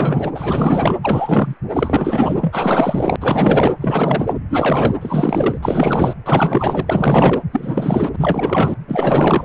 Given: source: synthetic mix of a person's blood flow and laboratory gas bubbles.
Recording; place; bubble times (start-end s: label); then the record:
Doppler ultrasound of blood flow; precordium
0.00-0.31 s: bubbles
0.34-0.99 s: bubbles
1.02-1.54 s: bubbles
1.73-3.16 s: bubbles
3.21-3.72 s: bubbles
3.81-4.34 s: bubbles
4.49-4.95 s: bubbles
5.00-5.57 s: bubbles
5.62-6.13 s: bubbles
6.26-7.43 s: bubbles
7.53-8.74 s: bubbles
8.88-9.45 s: bubbles
From the record:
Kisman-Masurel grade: 444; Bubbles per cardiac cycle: continuous sound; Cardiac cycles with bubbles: 100%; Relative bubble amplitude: maximal (0.775 to 0.999); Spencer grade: 4 (maximum detectable bubble signal sounding continuously throughout systole and diastole of every cardiac period, and overriding the amplitude of the normal cardiac signals); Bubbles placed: anywhere in the cardiac cycle